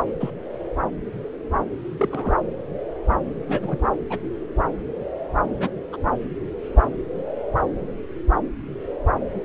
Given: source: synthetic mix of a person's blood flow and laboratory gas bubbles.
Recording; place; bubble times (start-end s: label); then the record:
Doppler ultrasound of blood flow; subclavian vein
0.20-0.31 s: bubbles
1.98-2.35 s: bubbles
3.48-3.78 s: bubbles
4.10-4.19 s: bubbles
5.60-5.69 s: bubbles
5.93-5.97 s: bubbles
From the record:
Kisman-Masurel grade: 122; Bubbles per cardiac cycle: 1 to 2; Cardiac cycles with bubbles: 10 to 50%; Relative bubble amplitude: moderate (0.250 to 0.450); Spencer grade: 2 (many but less than half of the cardiac periods contain bubble signals, singularly or in groups); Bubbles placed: anywhere in the cardiac cycle